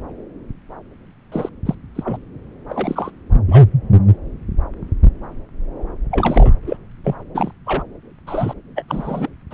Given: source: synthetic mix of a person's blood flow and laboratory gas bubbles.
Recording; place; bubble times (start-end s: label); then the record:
Doppler ultrasound of blood flow; subclavian vein
1.31-1.49 s: bubbles
1.65-1.75 s: bubbles
1.95-2.20 s: bubbles
2.70-3.11 s: bubbles
3.48-3.62 s: bubbles
6.11-6.52 s: bubbles
6.66-6.77 s: bubbles
7.04-7.14 s: bubbles
7.34-7.51 s: bubbles
7.66-7.83 s: bubbles
8.27-8.54 s: bubbles
8.75-8.84 s: bubbles
8.88-9.29 s: bubbles
9.50-9.54 s: bubbles
From the record:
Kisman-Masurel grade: 233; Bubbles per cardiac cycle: several, 3 to 8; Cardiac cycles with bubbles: 50 to 99%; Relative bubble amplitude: loud (0.450 to 0.775); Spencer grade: 3 (all of the cardiac periods contain showers or single bubble signals, but not dominating or overriding the cardiac motion signals); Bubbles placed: anywhere in the cardiac cycle